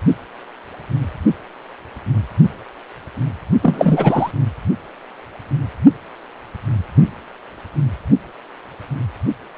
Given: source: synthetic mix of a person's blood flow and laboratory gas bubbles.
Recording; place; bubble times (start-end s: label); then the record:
Doppler ultrasound of blood flow; precordium
3.62-4.31 s: bubbles
From the record:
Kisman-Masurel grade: 223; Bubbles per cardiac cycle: several, 3 to 8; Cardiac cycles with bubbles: 10 to 50%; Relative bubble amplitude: loud (0.450 to 0.775); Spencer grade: 2 (many but less than half of the cardiac periods contain bubble signals, singularly or in groups); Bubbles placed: only in the low amplitude regions of the cardiac cycle